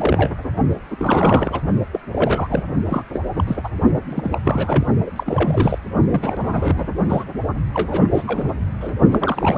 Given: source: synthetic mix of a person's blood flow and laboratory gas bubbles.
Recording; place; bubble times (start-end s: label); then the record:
Doppler ultrasound of blood flow; precordium
0.00-0.30 s: bubbles
0.90-1.61 s: bubbles
1.92-2.00 s: bubbles
2.12-2.63 s: bubbles
2.89-3.03 s: bubbles
3.12-3.21 s: bubbles
3.36-3.44 s: bubbles
3.46-3.56 s: bubbles
3.63-3.68 s: bubbles
4.08-4.38 s: bubbles
4.44-4.86 s: bubbles
5.06-5.11 s: bubbles
5.16-5.78 s: bubbles
6.09-6.87 s: bubbles
7.08-7.24 s: bubbles
7.74-8.06 s: bubbles
8.12-8.23 s: bubbles
8.27-8.53 s: bubbles
8.80-8.94 s: bubbles
9.11-9.58 s: bubbles
From the record:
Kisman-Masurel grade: 342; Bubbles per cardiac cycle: rolling drumbeat, 9 or more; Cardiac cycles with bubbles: 100%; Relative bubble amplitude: moderate (0.250 to 0.450); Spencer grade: 3 (all of the cardiac periods contain showers or single bubble signals, but not dominating or overriding the cardiac motion signals); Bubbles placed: only in the low amplitude regions of the cardiac cycle